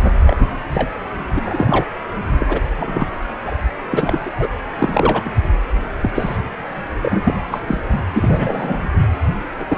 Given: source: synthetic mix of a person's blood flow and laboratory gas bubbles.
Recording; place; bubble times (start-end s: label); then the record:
Doppler ultrasound of blood flow; precordium
0.27-0.37 s: bubbles
0.71-0.89 s: bubbles
1.35-1.86 s: bubbles
2.39-2.60 s: bubbles
2.78-3.10 s: bubbles
3.44-3.54 s: bubbles
3.82-3.85 s: bubbles
3.92-4.47 s: bubbles
4.79-5.33 s: bubbles
6.01-6.10 s: bubbles
6.14-6.37 s: bubbles
7.02-7.43 s: bubbles
7.50-7.59 s: bubbles
7.67-7.81 s: bubbles
8.13-8.90 s: bubbles
9.59-9.66 s: bubbles
9.68-9.78 s: bubbles
From the record:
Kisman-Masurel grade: 242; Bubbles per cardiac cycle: several, 3 to 8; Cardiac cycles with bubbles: 100%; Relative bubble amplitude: moderate (0.250 to 0.450); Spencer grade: 3 (all of the cardiac periods contain showers or single bubble signals, but not dominating or overriding the cardiac motion signals); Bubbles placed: anywhere in the cardiac cycle